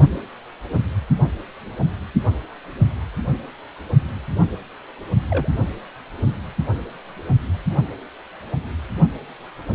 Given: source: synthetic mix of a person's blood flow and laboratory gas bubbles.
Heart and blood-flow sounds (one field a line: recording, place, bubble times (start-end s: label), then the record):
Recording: Doppler ultrasound of blood flow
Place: precordium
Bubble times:
5.30-5.48 s: bubbles
From the record:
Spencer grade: 2 (many but less than half of the cardiac periods contain bubble signals, singularly or in groups)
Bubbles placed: only in the low amplitude regions of the cardiac cycle